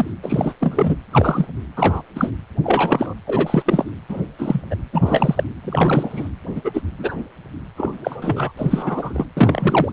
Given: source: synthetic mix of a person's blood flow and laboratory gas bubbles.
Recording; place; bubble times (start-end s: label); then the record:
Doppler ultrasound of blood flow; precordium
0.00-0.11 s: bubbles
0.23-0.53 s: bubbles
0.59-0.96 s: bubbles
1.11-1.46 s: bubbles
1.76-2.02 s: bubbles
2.15-2.31 s: bubbles
2.63-3.15 s: bubbles
3.27-3.62 s: bubbles
3.65-3.91 s: bubbles
4.08-4.22 s: bubbles
4.39-4.62 s: bubbles
4.70-4.76 s: bubbles
4.93-5.44 s: bubbles
5.62-6.29 s: bubbles
6.55-6.82 s: bubbles
6.98-7.16 s: bubbles
7.77-8.51 s: bubbles
8.57-9.26 s: bubbles
9.37-9.92 s: bubbles
From the record:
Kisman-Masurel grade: 243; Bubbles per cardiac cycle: several, 3 to 8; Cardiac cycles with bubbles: 100%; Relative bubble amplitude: loud (0.450 to 0.775); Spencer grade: 3 (all of the cardiac periods contain showers or single bubble signals, but not dominating or overriding the cardiac motion signals); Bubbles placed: anywhere in the cardiac cycle